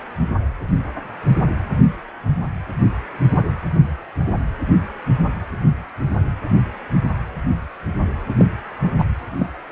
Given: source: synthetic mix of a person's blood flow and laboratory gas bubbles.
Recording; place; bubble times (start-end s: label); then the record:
Doppler ultrasound of blood flow; precordium
8.37-8.45 s: bubbles
8.99-9.05 s: bubbles
9.39-9.48 s: bubbles
From the record:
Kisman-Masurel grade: 122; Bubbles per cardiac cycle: 1 to 2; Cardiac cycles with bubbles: 10 to 50%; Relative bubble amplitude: moderate (0.250 to 0.450); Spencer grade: 2 (many but less than half of the cardiac periods contain bubble signals, singularly or in groups); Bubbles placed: anywhere in the cardiac cycle